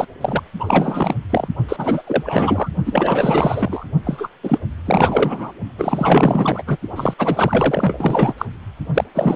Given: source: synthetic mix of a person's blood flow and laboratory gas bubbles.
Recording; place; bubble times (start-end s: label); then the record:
Doppler ultrasound of blood flow; precordium
0.00-0.05 s: bubbles
0.21-0.43 s: bubbles
0.59-1.15 s: bubbles
1.29-1.48 s: bubbles
1.69-2.03 s: bubbles
2.06-2.69 s: bubbles
2.85-3.84 s: bubbles
4.04-4.29 s: bubbles
4.43-4.58 s: bubbles
4.85-5.52 s: bubbles
5.78-6.63 s: bubbles
6.67-6.77 s: bubbles
6.96-7.14 s: bubbles
7.18-8.34 s: bubbles
8.38-8.45 s: bubbles
8.93-9.04 s: bubbles
9.14-9.36 s: bubbles
From the record:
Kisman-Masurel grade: 444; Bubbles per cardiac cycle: continuous sound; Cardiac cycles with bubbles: 100%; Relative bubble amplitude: maximal (0.775 to 0.999); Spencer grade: 4 (maximum detectable bubble signal sounding continuously throughout systole and diastole of every cardiac period, and overriding the amplitude of the normal cardiac signals); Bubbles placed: only in the low amplitude regions of the cardiac cycle